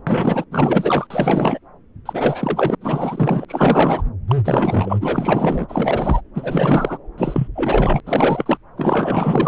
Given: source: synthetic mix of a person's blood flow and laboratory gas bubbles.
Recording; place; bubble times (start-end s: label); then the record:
Doppler ultrasound of blood flow; subclavian vein
0.07-0.44 s: bubbles
0.51-1.07 s: bubbles
1.10-1.59 s: bubbles
2.05-2.75 s: bubbles
2.80-3.45 s: bubbles
3.48-4.03 s: bubbles
4.28-4.36 s: bubbles
4.44-6.21 s: bubbles
6.34-6.98 s: bubbles
7.18-7.48 s: bubbles
7.55-8.01 s: bubbles
8.06-8.58 s: bubbles
8.77-9.48 s: bubbles
From the record:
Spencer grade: 4 (maximum detectable bubble signal sounding continuously throughout systole and diastole of every cardiac period, and overriding the amplitude of the normal cardiac signals); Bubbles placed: anywhere in the cardiac cycle